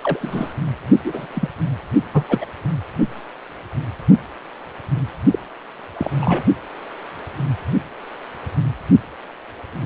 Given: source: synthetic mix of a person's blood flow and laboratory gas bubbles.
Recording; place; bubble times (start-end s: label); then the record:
Doppler ultrasound of blood flow; precordium
0.01-0.54 s: bubbles
1.04-1.27 s: bubbles
1.33-1.48 s: bubbles
2.13-2.24 s: bubbles
2.28-2.45 s: bubbles
5.32-5.39 s: bubbles
5.97-6.11 s: bubbles
6.21-6.44 s: bubbles
From the record:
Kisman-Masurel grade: 222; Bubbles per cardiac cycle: several, 3 to 8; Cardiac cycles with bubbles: 10 to 50%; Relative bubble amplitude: moderate (0.250 to 0.450); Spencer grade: 2 (many but less than half of the cardiac periods contain bubble signals, singularly or in groups); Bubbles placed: only in the low amplitude regions of the cardiac cycle